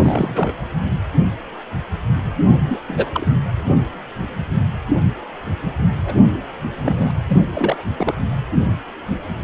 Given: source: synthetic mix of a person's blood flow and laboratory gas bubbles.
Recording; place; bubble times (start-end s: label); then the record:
Doppler ultrasound of blood flow; precordium
0.03-0.53 s: bubbles
2.69-2.80 s: bubbles
2.88-3.10 s: bubbles
3.13-3.36 s: bubbles
6.05-6.15 s: bubbles
6.76-7.11 s: bubbles
7.29-7.37 s: bubbles
7.51-7.90 s: bubbles
7.96-8.14 s: bubbles
From the record:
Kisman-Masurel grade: 222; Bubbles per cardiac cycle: several, 3 to 8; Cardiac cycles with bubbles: 10 to 50%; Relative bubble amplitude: moderate (0.250 to 0.450); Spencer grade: 2 (many but less than half of the cardiac periods contain bubble signals, singularly or in groups); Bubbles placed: anywhere in the cardiac cycle